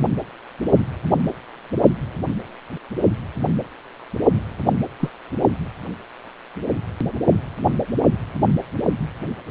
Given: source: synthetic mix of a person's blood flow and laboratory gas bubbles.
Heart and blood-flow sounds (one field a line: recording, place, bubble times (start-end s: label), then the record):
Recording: Doppler ultrasound of blood flow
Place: precordium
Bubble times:
4.34-4.41 s: bubbles
5.00-5.10 s: bubbles
From the record:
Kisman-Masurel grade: 112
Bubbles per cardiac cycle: 1 to 2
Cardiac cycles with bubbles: 1 to 10%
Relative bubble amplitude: moderate (0.250 to 0.450)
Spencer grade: 1 (occasional bubble signal discernible with the cardiac motion signal, with majority of cardiac periods free of bubbles)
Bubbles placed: only in the low amplitude regions of the cardiac cycle